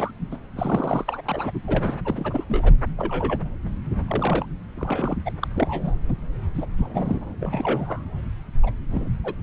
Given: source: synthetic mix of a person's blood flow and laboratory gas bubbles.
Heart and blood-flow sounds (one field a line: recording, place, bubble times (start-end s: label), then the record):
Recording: Doppler ultrasound of blood flow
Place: subclavian vein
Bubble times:
0.00-0.11 s: bubbles
0.31-0.37 s: bubbles
0.55-1.21 s: bubbles
1.25-1.51 s: bubbles
1.54-1.59 s: bubbles
1.67-1.98 s: bubbles
2.04-2.45 s: bubbles
2.49-2.73 s: bubbles
2.97-3.40 s: bubbles
4.07-4.46 s: bubbles
4.75-5.17 s: bubbles
5.25-5.31 s: bubbles
5.42-5.47 s: bubbles
5.54-5.96 s: bubbles
6.06-6.13 s: bubbles
6.54-6.66 s: bubbles
6.78-7.25 s: bubbles
7.40-8.04 s: bubbles
8.63-8.71 s: bubbles
8.90-9.10 s: bubbles
9.24-9.35 s: bubbles
From the record:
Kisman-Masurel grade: 242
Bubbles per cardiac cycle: several, 3 to 8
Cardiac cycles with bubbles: 100%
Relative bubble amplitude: moderate (0.250 to 0.450)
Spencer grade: 3 (all of the cardiac periods contain showers or single bubble signals, but not dominating or overriding the cardiac motion signals)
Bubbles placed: anywhere in the cardiac cycle